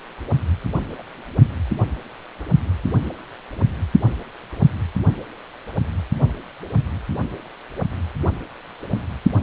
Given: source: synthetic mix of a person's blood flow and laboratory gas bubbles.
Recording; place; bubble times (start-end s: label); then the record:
Doppler ultrasound of blood flow; precordium
0.98-1.04 s: bubbles
From the record:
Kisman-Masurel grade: 121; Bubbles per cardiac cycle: 1 to 2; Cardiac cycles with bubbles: 10 to 50%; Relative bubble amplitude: barely perceptible (0.100 to 0.250); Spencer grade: 2 (many but less than half of the cardiac periods contain bubble signals, singularly or in groups); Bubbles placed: only in the low amplitude regions of the cardiac cycle